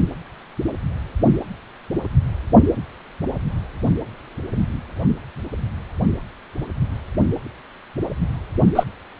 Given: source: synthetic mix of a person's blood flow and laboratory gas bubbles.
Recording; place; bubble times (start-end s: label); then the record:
Doppler ultrasound of blood flow; precordium
8.75-8.83 s: bubbles
From the record:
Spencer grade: 1 (occasional bubble signal discernible with the cardiac motion signal, with majority of cardiac periods free of bubbles); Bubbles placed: only in the low amplitude regions of the cardiac cycle